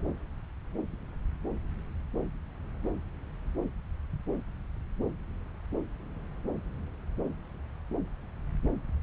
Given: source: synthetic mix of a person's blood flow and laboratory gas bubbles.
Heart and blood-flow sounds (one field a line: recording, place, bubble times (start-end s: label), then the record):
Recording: Doppler ultrasound of blood flow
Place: subclavian vein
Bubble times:
no bubbles
From the record:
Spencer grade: 0 (complete lack of bubble signals)